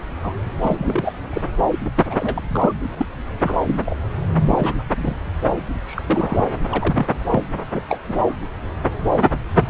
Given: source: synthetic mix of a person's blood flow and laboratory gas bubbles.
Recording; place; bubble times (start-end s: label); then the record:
Doppler ultrasound of blood flow; subclavian vein
0.23-0.33 s: bubbles
0.61-1.14 s: bubbles
1.32-1.42 s: bubbles
1.71-1.89 s: bubbles
1.96-2.05 s: bubbles
2.08-2.73 s: bubbles
2.97-3.06 s: bubbles
3.42-3.56 s: bubbles
3.66-3.82 s: bubbles
3.86-3.97 s: bubbles
4.45-4.83 s: bubbles
4.91-5.16 s: bubbles
5.86-6.04 s: bubbles
6.07-6.49 s: bubbles
6.71-7.07 s: bubbles
7.30-7.44 s: bubbles
7.72-7.83 s: bubbles
7.89-7.98 s: bubbles
8.07-8.14 s: bubbles
8.27-8.32 s: bubbles
9.11-9.23 s: bubbles
9.51-9.70 s: bubbles
From the record:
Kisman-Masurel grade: 242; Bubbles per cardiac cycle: several, 3 to 8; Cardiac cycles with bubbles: 100%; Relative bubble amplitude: moderate (0.250 to 0.450); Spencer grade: 3 (all of the cardiac periods contain showers or single bubble signals, but not dominating or overriding the cardiac motion signals); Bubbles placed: anywhere in the cardiac cycle